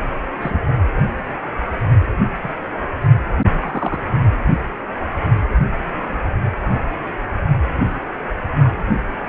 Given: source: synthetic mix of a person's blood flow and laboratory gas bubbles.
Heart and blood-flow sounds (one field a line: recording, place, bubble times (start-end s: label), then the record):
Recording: Doppler ultrasound of blood flow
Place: precordium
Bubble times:
0.41-0.58 s: bubbles
2.42-2.50 s: bubbles
3.59-4.04 s: bubbles
From the record:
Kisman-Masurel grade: 122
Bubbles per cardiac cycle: 1 to 2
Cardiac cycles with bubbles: 10 to 50%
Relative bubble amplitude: moderate (0.250 to 0.450)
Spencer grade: 2 (many but less than half of the cardiac periods contain bubble signals, singularly or in groups)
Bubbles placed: only in the low amplitude regions of the cardiac cycle